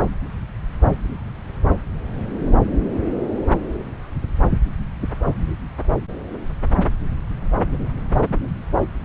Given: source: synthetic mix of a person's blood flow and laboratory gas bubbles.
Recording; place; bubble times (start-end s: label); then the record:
Doppler ultrasound of blood flow; subclavian vein
no bubbles
From the record:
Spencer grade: 0 (complete lack of bubble signals)